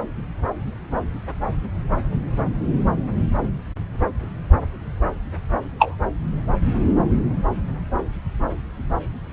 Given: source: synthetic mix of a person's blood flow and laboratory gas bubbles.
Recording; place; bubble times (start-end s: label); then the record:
Doppler ultrasound of blood flow; subclavian vein
5.79-5.96 s: bubbles
From the record:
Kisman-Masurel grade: 113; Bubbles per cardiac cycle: 1 to 2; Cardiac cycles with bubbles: 1 to 10%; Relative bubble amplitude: loud (0.450 to 0.775); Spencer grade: 1 (occasional bubble signal discernible with the cardiac motion signal, with majority of cardiac periods free of bubbles); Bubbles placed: anywhere in the cardiac cycle